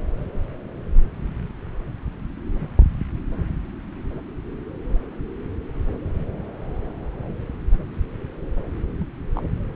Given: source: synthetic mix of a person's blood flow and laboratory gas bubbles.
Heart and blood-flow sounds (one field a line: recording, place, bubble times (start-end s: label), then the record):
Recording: Doppler ultrasound of blood flow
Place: subclavian vein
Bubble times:
8.99-9.06 s: bubbles
9.35-9.43 s: bubbles
From the record:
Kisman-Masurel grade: 111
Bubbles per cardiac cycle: 1 to 2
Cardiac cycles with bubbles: 1 to 10%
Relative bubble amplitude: barely perceptible (0.100 to 0.250)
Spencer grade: 1 (occasional bubble signal discernible with the cardiac motion signal, with majority of cardiac periods free of bubbles)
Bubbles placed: anywhere in the cardiac cycle